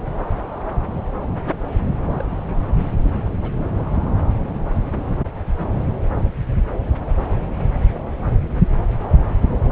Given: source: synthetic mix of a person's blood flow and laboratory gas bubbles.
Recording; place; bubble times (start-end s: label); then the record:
Doppler ultrasound of blood flow; subclavian vein
2.04-2.43 s: bubbles
2.55-2.62 s: bubbles
2.75-2.87 s: bubbles
3.41-3.52 s: bubbles
From the record:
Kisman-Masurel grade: 121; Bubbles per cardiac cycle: 1 to 2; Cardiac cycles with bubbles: 10 to 50%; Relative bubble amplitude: barely perceptible (0.100 to 0.250); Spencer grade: 2 (many but less than half of the cardiac periods contain bubble signals, singularly or in groups); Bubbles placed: anywhere in the cardiac cycle